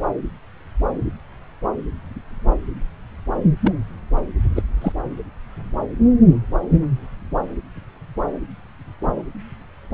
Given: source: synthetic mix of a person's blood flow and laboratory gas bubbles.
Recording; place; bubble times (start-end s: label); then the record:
Doppler ultrasound of blood flow; subclavian vein
3.62-3.72 s: bubbles
4.56-4.62 s: bubbles
4.82-4.92 s: bubbles
From the record:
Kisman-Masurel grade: 112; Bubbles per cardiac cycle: 1 to 2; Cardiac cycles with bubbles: 1 to 10%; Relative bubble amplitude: moderate (0.250 to 0.450); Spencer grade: 1 (occasional bubble signal discernible with the cardiac motion signal, with majority of cardiac periods free of bubbles); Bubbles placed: anywhere in the cardiac cycle